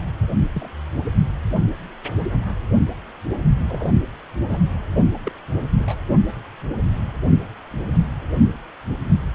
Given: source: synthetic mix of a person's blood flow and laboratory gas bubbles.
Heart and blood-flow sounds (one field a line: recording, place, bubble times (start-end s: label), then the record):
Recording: Doppler ultrasound of blood flow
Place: precordium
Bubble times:
0.53-0.69 s: bubbles
2.17-2.27 s: bubbles
3.69-3.91 s: bubbles
4.47-4.59 s: bubbles
5.24-5.32 s: bubbles
5.75-5.94 s: bubbles
From the record:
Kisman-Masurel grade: 121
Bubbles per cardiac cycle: 1 to 2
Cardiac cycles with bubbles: 10 to 50%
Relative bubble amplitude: barely perceptible (0.100 to 0.250)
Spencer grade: 2 (many but less than half of the cardiac periods contain bubble signals, singularly or in groups)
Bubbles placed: only in the low amplitude regions of the cardiac cycle